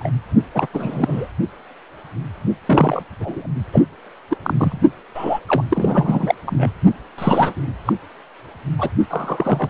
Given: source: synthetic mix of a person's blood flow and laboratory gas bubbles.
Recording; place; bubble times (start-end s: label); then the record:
Doppler ultrasound of blood flow; precordium
0.00-0.09 s: bubbles
0.54-0.67 s: bubbles
0.73-1.28 s: bubbles
2.65-3.03 s: bubbles
3.20-3.46 s: bubbles
3.72-3.83 s: bubbles
4.29-4.37 s: bubbles
4.42-4.79 s: bubbles
5.14-5.39 s: bubbles
5.47-5.64 s: bubbles
5.70-6.34 s: bubbles
6.46-6.70 s: bubbles
7.18-7.54 s: bubbles
7.85-7.93 s: bubbles
8.79-8.90 s: bubbles
9.10-9.70 s: bubbles
From the record:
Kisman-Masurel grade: 233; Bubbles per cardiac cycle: several, 3 to 8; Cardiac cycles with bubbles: 50 to 99%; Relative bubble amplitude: loud (0.450 to 0.775); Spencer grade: 3 (all of the cardiac periods contain showers or single bubble signals, but not dominating or overriding the cardiac motion signals); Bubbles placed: only in the low amplitude regions of the cardiac cycle